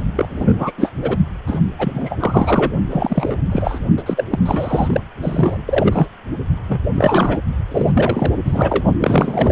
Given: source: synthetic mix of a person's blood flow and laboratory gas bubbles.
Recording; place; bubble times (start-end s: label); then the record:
Doppler ultrasound of blood flow; precordium
0.15-0.72 s: bubbles
0.78-0.91 s: bubbles
1.02-1.17 s: bubbles
1.46-1.60 s: bubbles
1.79-2.72 s: bubbles
2.90-3.37 s: bubbles
3.52-3.80 s: bubbles
3.97-4.03 s: bubbles
4.06-4.24 s: bubbles
4.31-4.39 s: bubbles
4.45-5.01 s: bubbles
5.22-6.09 s: bubbles
6.68-6.80 s: bubbles
6.94-7.40 s: bubbles
7.71-8.32 s: bubbles
8.45-8.84 s: bubbles
9.00-9.52 s: bubbles
From the record:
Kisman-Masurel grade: 343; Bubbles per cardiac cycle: rolling drumbeat, 9 or more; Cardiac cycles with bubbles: 100%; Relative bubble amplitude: loud (0.450 to 0.775); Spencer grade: 3 (all of the cardiac periods contain showers or single bubble signals, but not dominating or overriding the cardiac motion signals); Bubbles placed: only in the low amplitude regions of the cardiac cycle